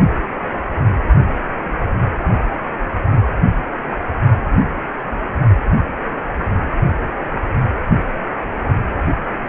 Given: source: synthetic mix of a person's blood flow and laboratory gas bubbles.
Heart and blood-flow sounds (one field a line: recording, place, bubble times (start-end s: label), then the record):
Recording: Doppler ultrasound of blood flow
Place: precordium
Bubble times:
no bubbles
From the record:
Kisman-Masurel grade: 000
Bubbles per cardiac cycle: 0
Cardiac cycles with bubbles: 0%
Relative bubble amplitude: no bubbles discernible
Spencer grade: 0 (complete lack of bubble signals)